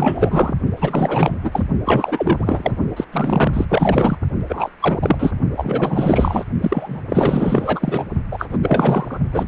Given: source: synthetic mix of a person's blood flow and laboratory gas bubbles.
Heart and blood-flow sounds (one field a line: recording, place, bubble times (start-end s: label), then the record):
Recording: Doppler ultrasound of blood flow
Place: precordium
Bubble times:
0.00-0.53 s: bubbles
0.76-1.35 s: bubbles
1.43-1.63 s: bubbles
1.85-2.76 s: bubbles
2.96-3.05 s: bubbles
3.12-3.65 s: bubbles
3.69-4.17 s: bubbles
4.49-4.70 s: bubbles
4.81-4.99 s: bubbles
5.02-5.31 s: bubbles
5.57-6.45 s: bubbles
6.62-7.01 s: bubbles
7.09-8.05 s: bubbles
8.31-8.58 s: bubbles
8.62-9.20 s: bubbles
9.30-9.48 s: bubbles
From the record:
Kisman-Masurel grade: 444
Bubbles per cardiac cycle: continuous sound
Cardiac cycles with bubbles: 100%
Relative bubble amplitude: maximal (0.775 to 0.999)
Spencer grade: 4 (maximum detectable bubble signal sounding continuously throughout systole and diastole of every cardiac period, and overriding the amplitude of the normal cardiac signals)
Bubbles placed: only in the low amplitude regions of the cardiac cycle